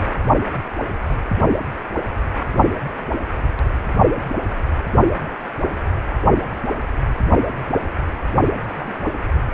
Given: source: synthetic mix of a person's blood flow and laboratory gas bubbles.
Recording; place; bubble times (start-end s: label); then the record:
Doppler ultrasound of blood flow; precordium
8.69-8.94 s: bubbles
From the record:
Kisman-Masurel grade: 111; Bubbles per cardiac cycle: 1 to 2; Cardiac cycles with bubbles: 1 to 10%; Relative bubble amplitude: barely perceptible (0.100 to 0.250); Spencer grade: 1 (occasional bubble signal discernible with the cardiac motion signal, with majority of cardiac periods free of bubbles); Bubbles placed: only in the low amplitude regions of the cardiac cycle